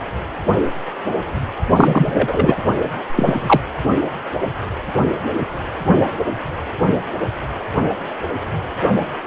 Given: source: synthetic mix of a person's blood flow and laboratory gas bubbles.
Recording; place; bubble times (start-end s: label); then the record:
Doppler ultrasound of blood flow; precordium
1.76-2.56 s: bubbles
3.15-3.60 s: bubbles
From the record:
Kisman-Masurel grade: 223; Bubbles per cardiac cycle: several, 3 to 8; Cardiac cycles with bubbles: 10 to 50%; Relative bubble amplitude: loud (0.450 to 0.775); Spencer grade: 2 (many but less than half of the cardiac periods contain bubble signals, singularly or in groups); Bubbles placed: only in the low amplitude regions of the cardiac cycle